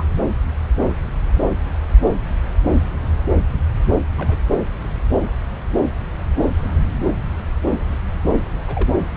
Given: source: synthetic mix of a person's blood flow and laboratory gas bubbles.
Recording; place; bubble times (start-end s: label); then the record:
Doppler ultrasound of blood flow; subclavian vein
0.00-0.03 s: bubbles
4.17-4.41 s: bubbles
8.67-8.90 s: bubbles
From the record:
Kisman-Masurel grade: 121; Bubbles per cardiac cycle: 1 to 2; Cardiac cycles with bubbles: 10 to 50%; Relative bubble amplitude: barely perceptible (0.100 to 0.250); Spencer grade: 2 (many but less than half of the cardiac periods contain bubble signals, singularly or in groups); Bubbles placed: anywhere in the cardiac cycle